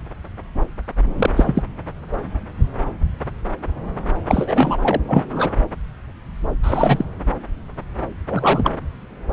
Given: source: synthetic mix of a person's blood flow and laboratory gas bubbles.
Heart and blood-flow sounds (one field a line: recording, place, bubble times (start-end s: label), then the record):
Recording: Doppler ultrasound of blood flow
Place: subclavian vein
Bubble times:
1.16-1.30 s: bubbles
1.36-1.63 s: bubbles
4.27-4.97 s: bubbles
5.08-5.56 s: bubbles
6.62-7.05 s: bubbles
8.28-8.71 s: bubbles
From the record:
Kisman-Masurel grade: 223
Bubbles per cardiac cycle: several, 3 to 8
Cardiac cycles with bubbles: 10 to 50%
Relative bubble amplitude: loud (0.450 to 0.775)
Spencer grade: 2 (many but less than half of the cardiac periods contain bubble signals, singularly or in groups)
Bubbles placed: anywhere in the cardiac cycle